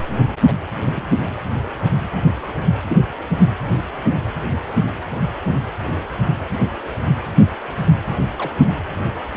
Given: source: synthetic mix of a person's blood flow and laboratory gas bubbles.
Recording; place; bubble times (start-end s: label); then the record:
Doppler ultrasound of blood flow; precordium
0.47-0.54 s: bubbles
0.83-1.15 s: bubbles
2.88-2.98 s: bubbles
4.56-4.60 s: bubbles
8.04-8.23 s: bubbles
8.38-8.51 s: bubbles
From the record:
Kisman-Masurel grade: 121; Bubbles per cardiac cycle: 1 to 2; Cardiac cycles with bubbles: 10 to 50%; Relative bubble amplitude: barely perceptible (0.100 to 0.250); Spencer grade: 2 (many but less than half of the cardiac periods contain bubble signals, singularly or in groups); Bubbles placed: anywhere in the cardiac cycle